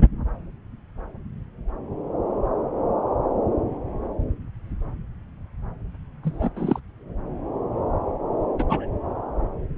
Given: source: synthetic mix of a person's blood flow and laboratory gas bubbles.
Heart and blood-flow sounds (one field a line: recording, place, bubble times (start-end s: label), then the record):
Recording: Doppler ultrasound of blood flow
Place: subclavian vein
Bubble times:
6.23-6.50 s: bubbles
6.56-6.79 s: bubbles
8.58-8.64 s: bubbles
8.69-8.87 s: bubbles
From the record:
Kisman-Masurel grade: 222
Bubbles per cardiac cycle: several, 3 to 8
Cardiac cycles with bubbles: 10 to 50%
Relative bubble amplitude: moderate (0.250 to 0.450)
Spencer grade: 2 (many but less than half of the cardiac periods contain bubble signals, singularly or in groups)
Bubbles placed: anywhere in the cardiac cycle